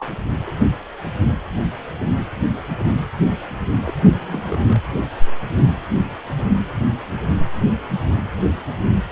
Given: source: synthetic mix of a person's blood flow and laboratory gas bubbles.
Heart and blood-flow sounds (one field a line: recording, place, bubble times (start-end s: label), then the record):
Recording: Doppler ultrasound of blood flow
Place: precordium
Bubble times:
0.00-0.07 s: bubbles
0.46-0.56 s: bubbles
3.84-3.94 s: bubbles
4.04-4.82 s: bubbles
From the record:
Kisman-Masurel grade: 221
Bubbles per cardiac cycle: several, 3 to 8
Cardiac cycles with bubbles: 10 to 50%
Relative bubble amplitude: barely perceptible (0.100 to 0.250)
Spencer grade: 2 (many but less than half of the cardiac periods contain bubble signals, singularly or in groups)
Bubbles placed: anywhere in the cardiac cycle